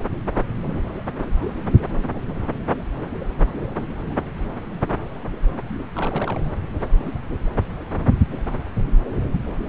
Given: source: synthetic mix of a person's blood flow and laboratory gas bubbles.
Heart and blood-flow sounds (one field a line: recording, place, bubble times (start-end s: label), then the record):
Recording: Doppler ultrasound of blood flow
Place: subclavian vein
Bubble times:
5.96-6.41 s: bubbles
From the record:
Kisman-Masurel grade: 111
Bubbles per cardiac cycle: 1 to 2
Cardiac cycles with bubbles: 1 to 10%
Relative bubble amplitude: barely perceptible (0.100 to 0.250)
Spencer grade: 1 (occasional bubble signal discernible with the cardiac motion signal, with majority of cardiac periods free of bubbles)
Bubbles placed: anywhere in the cardiac cycle